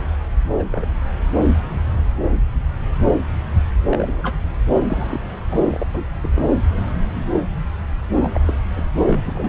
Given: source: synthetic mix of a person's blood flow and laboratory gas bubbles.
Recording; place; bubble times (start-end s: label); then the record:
Doppler ultrasound of blood flow; subclavian vein
0.56-0.64 s: bubbles
0.71-0.86 s: bubbles
3.90-4.38 s: bubbles
4.88-5.21 s: bubbles
5.51-5.86 s: bubbles
5.93-6.07 s: bubbles
6.21-6.29 s: bubbles
6.35-6.46 s: bubbles
8.16-8.40 s: bubbles
8.47-8.54 s: bubbles
8.76-8.83 s: bubbles
8.96-9.49 s: bubbles
From the record:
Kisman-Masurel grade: 232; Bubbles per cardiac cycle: several, 3 to 8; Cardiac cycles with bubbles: 50 to 99%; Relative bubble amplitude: moderate (0.250 to 0.450); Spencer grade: 3 (all of the cardiac periods contain showers or single bubble signals, but not dominating or overriding the cardiac motion signals); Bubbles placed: anywhere in the cardiac cycle